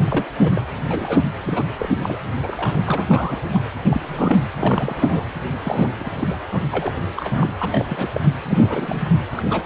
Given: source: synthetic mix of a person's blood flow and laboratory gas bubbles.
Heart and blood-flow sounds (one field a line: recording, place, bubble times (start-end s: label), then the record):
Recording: Doppler ultrasound of blood flow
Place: precordium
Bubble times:
0.05-0.29 s: bubbles
0.39-0.62 s: bubbles
0.89-1.23 s: bubbles
1.37-1.73 s: bubbles
1.79-1.89 s: bubbles
2.02-2.17 s: bubbles
2.42-2.81 s: bubbles
2.86-3.06 s: bubbles
3.08-3.65 s: bubbles
3.85-4.39 s: bubbles
4.54-5.26 s: bubbles
5.64-5.93 s: bubbles
5.98-6.38 s: bubbles
6.52-6.60 s: bubbles
6.71-6.92 s: bubbles
7.16-7.54 s: bubbles
7.58-7.85 s: bubbles
7.88-8.09 s: bubbles
8.12-8.21 s: bubbles
8.47-9.00 s: bubbles
9.37-9.66 s: bubbles
From the record:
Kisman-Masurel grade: 342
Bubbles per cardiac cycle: rolling drumbeat, 9 or more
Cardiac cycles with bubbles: 100%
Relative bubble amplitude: moderate (0.250 to 0.450)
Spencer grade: 3 (all of the cardiac periods contain showers or single bubble signals, but not dominating or overriding the cardiac motion signals)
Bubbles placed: anywhere in the cardiac cycle